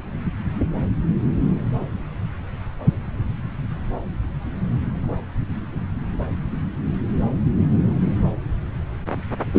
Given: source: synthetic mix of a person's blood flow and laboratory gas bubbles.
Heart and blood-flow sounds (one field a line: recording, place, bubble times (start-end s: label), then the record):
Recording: Doppler ultrasound of blood flow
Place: subclavian vein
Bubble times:
9.54-9.59 s: bubbles
From the record:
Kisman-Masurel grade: 113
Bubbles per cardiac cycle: 1 to 2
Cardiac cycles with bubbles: 1 to 10%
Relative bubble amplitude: loud (0.450 to 0.775)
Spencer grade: 1 (occasional bubble signal discernible with the cardiac motion signal, with majority of cardiac periods free of bubbles)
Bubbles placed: anywhere in the cardiac cycle